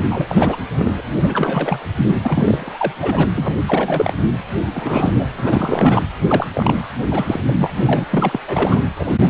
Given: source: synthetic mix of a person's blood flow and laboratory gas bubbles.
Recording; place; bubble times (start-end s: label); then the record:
Doppler ultrasound of blood flow; precordium
0.10-0.62 s: bubbles
0.79-1.02 s: bubbles
1.22-1.80 s: bubbles
1.96-2.11 s: bubbles
2.23-2.92 s: bubbles
3.00-3.28 s: bubbles
3.36-3.55 s: bubbles
3.68-4.14 s: bubbles
4.74-5.26 s: bubbles
5.38-6.03 s: bubbles
6.28-6.46 s: bubbles
6.54-6.89 s: bubbles
7.11-7.40 s: bubbles
7.49-8.04 s: bubbles
8.11-8.41 s: bubbles
8.47-8.81 s: bubbles
8.99-9.18 s: bubbles
9.21-9.28 s: bubbles
From the record:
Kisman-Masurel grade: 343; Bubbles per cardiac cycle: rolling drumbeat, 9 or more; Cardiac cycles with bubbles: 100%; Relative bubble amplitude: loud (0.450 to 0.775); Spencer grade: 3 (all of the cardiac periods contain showers or single bubble signals, but not dominating or overriding the cardiac motion signals); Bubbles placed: anywhere in the cardiac cycle